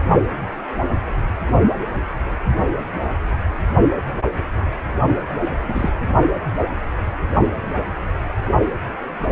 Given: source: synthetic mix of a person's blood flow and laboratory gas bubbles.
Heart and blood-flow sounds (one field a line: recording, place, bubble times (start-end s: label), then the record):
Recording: Doppler ultrasound of blood flow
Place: precordium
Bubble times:
5.68-5.91 s: bubbles
From the record:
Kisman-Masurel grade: 112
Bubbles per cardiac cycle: 1 to 2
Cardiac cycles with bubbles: 1 to 10%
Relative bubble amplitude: moderate (0.250 to 0.450)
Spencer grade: 1 (occasional bubble signal discernible with the cardiac motion signal, with majority of cardiac periods free of bubbles)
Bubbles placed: only in the low amplitude regions of the cardiac cycle